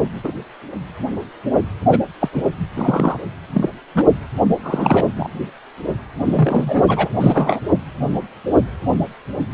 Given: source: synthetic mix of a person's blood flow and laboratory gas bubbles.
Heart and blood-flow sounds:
Doppler ultrasound of blood flow; precordium
0.23-0.33 s: bubbles
1.89-2.00 s: bubbles
2.20-2.29 s: bubbles
2.32-2.42 s: bubbles
2.75-3.17 s: bubbles
3.53-3.69 s: bubbles
3.94-4.06 s: bubbles
4.62-5.08 s: bubbles
5.16-5.30 s: bubbles
6.26-6.84 s: bubbles
6.88-7.08 s: bubbles
7.20-7.60 s: bubbles
From the record:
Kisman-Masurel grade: 233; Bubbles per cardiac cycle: several, 3 to 8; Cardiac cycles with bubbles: 50 to 99%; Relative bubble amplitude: loud (0.450 to 0.775); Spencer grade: 3 (all of the cardiac periods contain showers or single bubble signals, but not dominating or overriding the cardiac motion signals); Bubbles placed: anywhere in the cardiac cycle

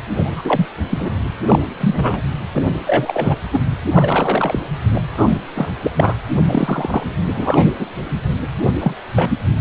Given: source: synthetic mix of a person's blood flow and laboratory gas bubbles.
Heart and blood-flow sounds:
Doppler ultrasound of blood flow; precordium
0.23-0.66 s: bubbles
0.91-1.10 s: bubbles
1.46-1.59 s: bubbles
1.80-2.23 s: bubbles
2.55-2.65 s: bubbles
2.86-3.38 s: bubbles
3.52-3.59 s: bubbles
3.92-4.59 s: bubbles
4.95-5.01 s: bubbles
5.17-5.28 s: bubbles
5.55-5.71 s: bubbles
5.82-5.91 s: bubbles
5.96-6.14 s: bubbles
6.35-6.42 s: bubbles
6.47-7.04 s: bubbles
7.34-7.67 s: bubbles
7.79-7.87 s: bubbles
8.80-8.95 s: bubbles
9.15-9.30 s: bubbles
From the record:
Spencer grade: 3 (all of the cardiac periods contain showers or single bubble signals, but not dominating or overriding the cardiac motion signals); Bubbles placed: anywhere in the cardiac cycle

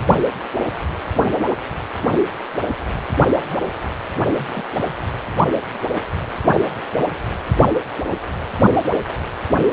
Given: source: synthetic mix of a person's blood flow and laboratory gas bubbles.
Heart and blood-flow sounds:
Doppler ultrasound of blood flow; precordium
0.84-0.87 s: bubbles
3.32-3.53 s: bubbles
4.36-4.65 s: bubbles
4.75-4.81 s: bubbles
8.07-8.18 s: bubbles
From the record:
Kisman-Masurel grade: 121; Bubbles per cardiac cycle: 1 to 2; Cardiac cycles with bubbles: 10 to 50%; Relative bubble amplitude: barely perceptible (0.100 to 0.250); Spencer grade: 2 (many but less than half of the cardiac periods contain bubble signals, singularly or in groups); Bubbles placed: anywhere in the cardiac cycle

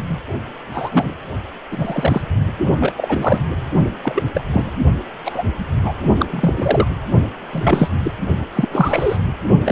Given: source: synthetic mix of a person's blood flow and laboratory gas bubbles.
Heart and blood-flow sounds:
Doppler ultrasound of blood flow; precordium
0.00-0.19 s: bubbles
0.73-1.14 s: bubbles
1.71-2.21 s: bubbles
2.80-2.92 s: bubbles
2.97-3.43 s: bubbles
4.04-4.23 s: bubbles
4.34-4.43 s: bubbles
4.52-4.72 s: bubbles
5.25-5.46 s: bubbles
5.79-6.01 s: bubbles
6.19-6.25 s: bubbles
6.30-6.53 s: bubbles
6.57-6.87 s: bubbles
7.52-7.89 s: bubbles
8.04-8.11 s: bubbles
8.54-8.69 s: bubbles
8.71-9.18 s: bubbles
9.65-9.72 s: bubbles
From the record:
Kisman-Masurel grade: 233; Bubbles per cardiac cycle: several, 3 to 8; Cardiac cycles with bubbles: 50 to 99%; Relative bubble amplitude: loud (0.450 to 0.775); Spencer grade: 3 (all of the cardiac periods contain showers or single bubble signals, but not dominating or overriding the cardiac motion signals); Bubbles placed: only in the low amplitude regions of the cardiac cycle

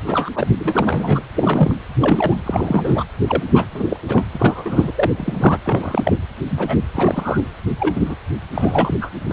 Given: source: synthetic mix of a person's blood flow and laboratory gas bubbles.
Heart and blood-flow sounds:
Doppler ultrasound of blood flow; precordium
0.06-0.30 s: bubbles
0.35-0.47 s: bubbles
0.59-1.21 s: bubbles
1.35-1.75 s: bubbles
2.00-2.41 s: bubbles
2.46-3.04 s: bubbles
3.27-3.43 s: bubbles
3.54-3.67 s: bubbles
3.74-3.99 s: bubbles
4.08-4.25 s: bubbles
4.32-4.92 s: bubbles
4.95-5.12 s: bubbles
5.17-5.60 s: bubbles
5.62-6.13 s: bubbles
6.50-6.77 s: bubbles
6.95-7.40 s: bubbles
7.79-8.15 s: bubbles
8.54-8.95 s: bubbles
9.01-9.11 s: bubbles
9.28-9.33 s: bubbles
From the record:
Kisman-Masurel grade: 242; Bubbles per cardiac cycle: several, 3 to 8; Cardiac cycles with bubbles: 100%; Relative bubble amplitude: moderate (0.250 to 0.450); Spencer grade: 3 (all of the cardiac periods contain showers or single bubble signals, but not dominating or overriding the cardiac motion signals); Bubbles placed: anywhere in the cardiac cycle

